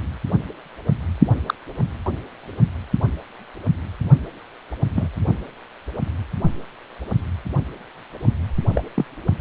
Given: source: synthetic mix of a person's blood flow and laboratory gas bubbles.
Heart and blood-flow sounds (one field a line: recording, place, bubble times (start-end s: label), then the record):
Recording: Doppler ultrasound of blood flow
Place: precordium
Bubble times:
1.46-1.54 s: bubbles
4.95-5.08 s: bubbles
8.75-8.84 s: bubbles
8.94-9.05 s: bubbles
From the record:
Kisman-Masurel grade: 122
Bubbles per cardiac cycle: 1 to 2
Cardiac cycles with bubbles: 10 to 50%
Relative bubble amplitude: moderate (0.250 to 0.450)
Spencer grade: 2 (many but less than half of the cardiac periods contain bubble signals, singularly or in groups)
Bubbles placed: only in the low amplitude regions of the cardiac cycle